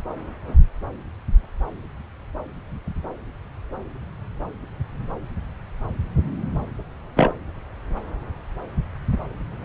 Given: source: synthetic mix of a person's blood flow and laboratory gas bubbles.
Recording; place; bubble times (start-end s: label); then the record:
Doppler ultrasound of blood flow; subclavian vein
7.16-7.32 s: bubbles
From the record:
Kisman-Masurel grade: 113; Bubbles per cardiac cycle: 1 to 2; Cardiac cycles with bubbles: 1 to 10%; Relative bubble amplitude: loud (0.450 to 0.775); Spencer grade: 1 (occasional bubble signal discernible with the cardiac motion signal, with majority of cardiac periods free of bubbles); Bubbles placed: anywhere in the cardiac cycle